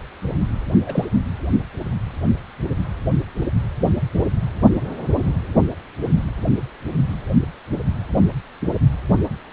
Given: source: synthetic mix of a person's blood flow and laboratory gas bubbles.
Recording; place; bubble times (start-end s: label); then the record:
Doppler ultrasound of blood flow; precordium
0.86-1.05 s: bubbles
From the record:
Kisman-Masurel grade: 111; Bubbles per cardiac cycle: 1 to 2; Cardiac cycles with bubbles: 1 to 10%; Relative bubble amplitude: barely perceptible (0.100 to 0.250); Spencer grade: 1 (occasional bubble signal discernible with the cardiac motion signal, with majority of cardiac periods free of bubbles); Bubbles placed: anywhere in the cardiac cycle